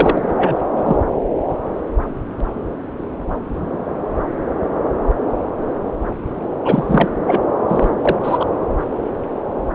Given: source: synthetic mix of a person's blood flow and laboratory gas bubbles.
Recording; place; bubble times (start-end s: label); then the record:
Doppler ultrasound of blood flow; subclavian vein
0.00-0.56 s: bubbles
0.76-0.82 s: bubbles
0.84-0.96 s: bubbles
6.64-7.09 s: bubbles
7.26-7.40 s: bubbles
7.68-7.92 s: bubbles
8.02-8.16 s: bubbles
8.23-8.46 s: bubbles
From the record:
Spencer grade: 2 (many but less than half of the cardiac periods contain bubble signals, singularly or in groups); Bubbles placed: anywhere in the cardiac cycle